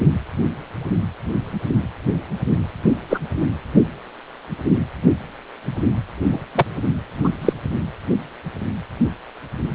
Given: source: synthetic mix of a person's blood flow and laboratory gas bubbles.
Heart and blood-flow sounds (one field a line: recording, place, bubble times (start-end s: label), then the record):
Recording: Doppler ultrasound of blood flow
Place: precordium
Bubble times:
3.10-3.19 s: bubbles
6.30-6.39 s: bubbles
6.55-6.66 s: bubbles
7.24-7.29 s: bubbles
7.41-7.53 s: bubbles
From the record:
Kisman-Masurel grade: 123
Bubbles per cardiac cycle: 1 to 2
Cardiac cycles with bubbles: 10 to 50%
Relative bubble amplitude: loud (0.450 to 0.775)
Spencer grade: 2 (many but less than half of the cardiac periods contain bubble signals, singularly or in groups)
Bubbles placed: anywhere in the cardiac cycle